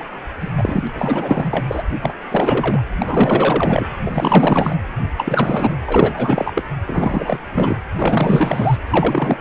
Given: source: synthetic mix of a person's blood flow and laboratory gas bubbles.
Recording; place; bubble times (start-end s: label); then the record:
Doppler ultrasound of blood flow; precordium
0.00-0.04 s: bubbles
0.40-0.51 s: bubbles
0.56-0.84 s: bubbles
0.87-0.90 s: bubbles
0.94-1.82 s: bubbles
2.01-2.13 s: bubbles
2.29-2.81 s: bubbles
2.98-3.87 s: bubbles
4.05-4.75 s: bubbles
5.17-5.76 s: bubbles
5.86-6.63 s: bubbles
6.87-7.40 s: bubbles
7.51-7.77 s: bubbles
7.94-8.77 s: bubbles
8.90-9.37 s: bubbles
From the record:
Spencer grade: 4 (maximum detectable bubble signal sounding continuously throughout systole and diastole of every cardiac period, and overriding the amplitude of the normal cardiac signals); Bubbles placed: anywhere in the cardiac cycle